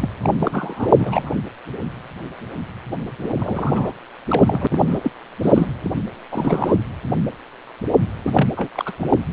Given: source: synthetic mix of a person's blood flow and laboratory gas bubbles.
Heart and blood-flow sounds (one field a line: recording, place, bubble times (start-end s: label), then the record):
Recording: Doppler ultrasound of blood flow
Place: precordium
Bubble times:
0.00-0.09 s: bubbles
0.23-0.33 s: bubbles
0.40-1.30 s: bubbles
3.18-3.33 s: bubbles
3.39-3.92 s: bubbles
4.27-4.67 s: bubbles
4.70-5.11 s: bubbles
5.43-5.73 s: bubbles
5.83-5.91 s: bubbles
6.31-6.75 s: bubbles
8.24-8.49 s: bubbles
8.57-8.69 s: bubbles
8.74-8.93 s: bubbles
8.99-9.19 s: bubbles
From the record:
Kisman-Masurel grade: 332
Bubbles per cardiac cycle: rolling drumbeat, 9 or more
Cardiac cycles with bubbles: 50 to 99%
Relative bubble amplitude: moderate (0.250 to 0.450)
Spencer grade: 3 (all of the cardiac periods contain showers or single bubble signals, but not dominating or overriding the cardiac motion signals)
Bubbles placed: anywhere in the cardiac cycle